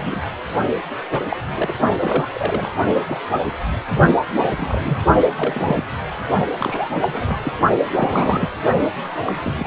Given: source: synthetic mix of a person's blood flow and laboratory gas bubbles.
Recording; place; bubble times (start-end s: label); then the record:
Doppler ultrasound of blood flow; precordium
0.00-0.21 s: bubbles
1.11-1.24 s: bubbles
1.29-1.37 s: bubbles
1.55-1.73 s: bubbles
2.00-2.27 s: bubbles
2.33-2.71 s: bubbles
3.07-3.19 s: bubbles
3.34-3.40 s: bubbles
4.36-4.99 s: bubbles
5.37-5.83 s: bubbles
6.58-6.90 s: bubbles
7.02-7.53 s: bubbles
7.96-8.49 s: bubbles
9.26-9.33 s: bubbles
9.45-9.67 s: bubbles
From the record:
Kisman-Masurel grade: 232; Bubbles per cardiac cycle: several, 3 to 8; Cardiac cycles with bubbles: 50 to 99%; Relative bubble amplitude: moderate (0.250 to 0.450); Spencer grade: 3 (all of the cardiac periods contain showers or single bubble signals, but not dominating or overriding the cardiac motion signals); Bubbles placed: only in the low amplitude regions of the cardiac cycle